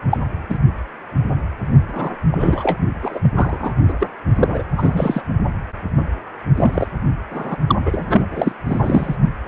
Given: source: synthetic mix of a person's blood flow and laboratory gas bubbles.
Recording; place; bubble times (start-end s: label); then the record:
Doppler ultrasound of blood flow; precordium
0.11-0.18 s: bubbles
0.49-0.58 s: bubbles
1.89-2.11 s: bubbles
2.31-2.77 s: bubbles
3.02-3.32 s: bubbles
3.35-3.73 s: bubbles
3.88-3.93 s: bubbles
4.00-4.07 s: bubbles
4.35-4.62 s: bubbles
4.78-5.21 s: bubbles
6.57-6.88 s: bubbles
7.31-7.56 s: bubbles
7.67-7.75 s: bubbles
7.86-8.28 s: bubbles
8.31-8.52 s: bubbles
8.65-9.15 s: bubbles
From the record:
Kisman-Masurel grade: 233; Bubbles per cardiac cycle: several, 3 to 8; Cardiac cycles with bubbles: 50 to 99%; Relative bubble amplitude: loud (0.450 to 0.775); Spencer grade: 3 (all of the cardiac periods contain showers or single bubble signals, but not dominating or overriding the cardiac motion signals); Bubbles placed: only in the low amplitude regions of the cardiac cycle